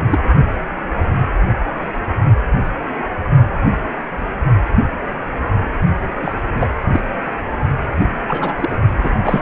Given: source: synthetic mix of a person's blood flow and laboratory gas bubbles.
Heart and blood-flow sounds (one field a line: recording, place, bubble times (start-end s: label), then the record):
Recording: Doppler ultrasound of blood flow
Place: precordium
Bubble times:
0.00-0.02 s: bubbles
0.10-0.18 s: bubbles
6.22-6.33 s: bubbles
6.60-6.69 s: bubbles
6.92-7.00 s: bubbles
8.28-8.77 s: bubbles
8.96-9.42 s: bubbles
From the record:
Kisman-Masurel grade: 222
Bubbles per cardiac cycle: several, 3 to 8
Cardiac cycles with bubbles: 10 to 50%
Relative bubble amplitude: moderate (0.250 to 0.450)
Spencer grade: 2 (many but less than half of the cardiac periods contain bubble signals, singularly or in groups)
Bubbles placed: only in the low amplitude regions of the cardiac cycle